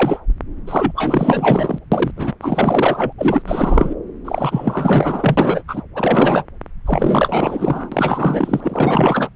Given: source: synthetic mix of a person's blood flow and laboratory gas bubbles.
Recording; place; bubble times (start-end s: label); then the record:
Doppler ultrasound of blood flow; subclavian vein
0.00-0.20 s: bubbles
0.67-0.92 s: bubbles
0.95-1.79 s: bubbles
1.92-2.12 s: bubbles
2.16-2.33 s: bubbles
2.41-3.12 s: bubbles
3.18-3.42 s: bubbles
3.45-3.95 s: bubbles
4.24-5.63 s: bubbles
5.68-5.82 s: bubbles
5.95-6.44 s: bubbles
6.86-9.29 s: bubbles
From the record:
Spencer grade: 4 (maximum detectable bubble signal sounding continuously throughout systole and diastole of every cardiac period, and overriding the amplitude of the normal cardiac signals); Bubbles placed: anywhere in the cardiac cycle